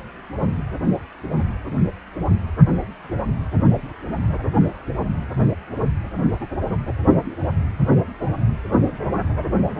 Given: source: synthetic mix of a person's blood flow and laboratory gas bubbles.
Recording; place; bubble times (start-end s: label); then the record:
Doppler ultrasound of blood flow; precordium
no bubbles
From the record:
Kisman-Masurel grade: 000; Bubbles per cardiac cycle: 0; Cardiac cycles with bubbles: 0%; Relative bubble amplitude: no bubbles discernible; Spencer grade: 0 (complete lack of bubble signals)